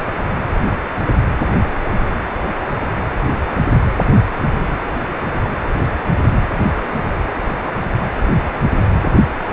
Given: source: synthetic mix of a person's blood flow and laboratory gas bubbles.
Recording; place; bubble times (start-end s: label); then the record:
Doppler ultrasound of blood flow; precordium
6.95-7.10 s: bubbles
From the record:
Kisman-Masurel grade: 111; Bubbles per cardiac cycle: 1 to 2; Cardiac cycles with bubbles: 1 to 10%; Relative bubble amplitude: barely perceptible (0.100 to 0.250); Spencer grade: 1 (occasional bubble signal discernible with the cardiac motion signal, with majority of cardiac periods free of bubbles); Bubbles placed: anywhere in the cardiac cycle